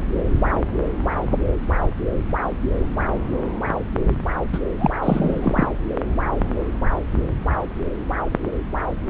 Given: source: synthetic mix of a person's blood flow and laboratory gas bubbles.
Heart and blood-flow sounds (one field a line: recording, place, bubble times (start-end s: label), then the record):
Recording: Doppler ultrasound of blood flow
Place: subclavian vein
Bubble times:
4.52-4.58 s: bubbles
4.78-4.91 s: bubbles
5.02-5.68 s: bubbles
From the record:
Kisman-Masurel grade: 222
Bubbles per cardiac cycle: several, 3 to 8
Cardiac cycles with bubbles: 10 to 50%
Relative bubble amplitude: moderate (0.250 to 0.450)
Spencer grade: 2 (many but less than half of the cardiac periods contain bubble signals, singularly or in groups)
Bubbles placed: anywhere in the cardiac cycle